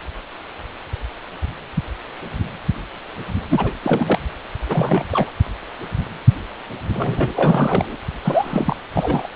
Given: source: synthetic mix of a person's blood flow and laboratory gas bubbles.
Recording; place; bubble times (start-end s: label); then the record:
Doppler ultrasound of blood flow; precordium
3.50-3.72 s: bubbles
3.83-4.19 s: bubbles
4.66-5.04 s: bubbles
5.12-5.29 s: bubbles
6.94-7.32 s: bubbles
7.36-7.97 s: bubbles
8.24-8.77 s: bubbles
8.94-9.27 s: bubbles
From the record:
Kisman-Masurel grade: 332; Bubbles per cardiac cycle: rolling drumbeat, 9 or more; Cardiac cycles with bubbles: 50 to 99%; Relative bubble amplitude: moderate (0.250 to 0.450); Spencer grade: 3 (all of the cardiac periods contain showers or single bubble signals, but not dominating or overriding the cardiac motion signals); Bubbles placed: anywhere in the cardiac cycle